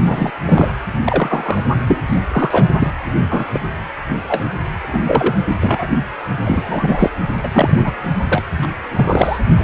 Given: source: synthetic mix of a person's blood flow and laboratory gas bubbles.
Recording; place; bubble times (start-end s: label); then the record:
Doppler ultrasound of blood flow; precordium
0.04-0.31 s: bubbles
0.45-0.72 s: bubbles
1.05-1.61 s: bubbles
1.87-2.02 s: bubbles
2.06-2.20 s: bubbles
2.31-2.68 s: bubbles
2.79-2.91 s: bubbles
3.29-3.46 s: bubbles
3.53-3.60 s: bubbles
4.09-4.15 s: bubbles
4.27-4.49 s: bubbles
4.81-5.01 s: bubbles
5.06-5.34 s: bubbles
5.48-5.56 s: bubbles
5.60-5.87 s: bubbles
6.45-7.10 s: bubbles
7.38-7.49 s: bubbles
7.53-7.91 s: bubbles
8.29-8.43 s: bubbles
8.62-8.66 s: bubbles
8.95-9.39 s: bubbles
9.55-9.64 s: bubbles
From the record:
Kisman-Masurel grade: 233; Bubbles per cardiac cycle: several, 3 to 8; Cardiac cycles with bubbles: 50 to 99%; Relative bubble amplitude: loud (0.450 to 0.775); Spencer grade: 3 (all of the cardiac periods contain showers or single bubble signals, but not dominating or overriding the cardiac motion signals); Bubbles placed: anywhere in the cardiac cycle